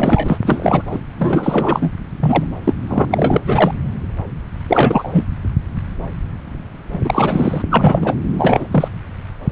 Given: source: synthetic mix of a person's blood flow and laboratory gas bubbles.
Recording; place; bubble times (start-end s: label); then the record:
Doppler ultrasound of blood flow; subclavian vein
0.00-0.38 s: bubbles
0.45-0.83 s: bubbles
0.91-0.98 s: bubbles
1.18-1.91 s: bubbles
2.20-2.48 s: bubbles
2.64-2.74 s: bubbles
2.89-3.05 s: bubbles
3.10-3.73 s: bubbles
4.67-5.24 s: bubbles
7.04-7.62 s: bubbles
7.70-8.17 s: bubbles
8.38-8.68 s: bubbles
8.71-8.88 s: bubbles
From the record:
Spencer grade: 3 (all of the cardiac periods contain showers or single bubble signals, but not dominating or overriding the cardiac motion signals); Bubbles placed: anywhere in the cardiac cycle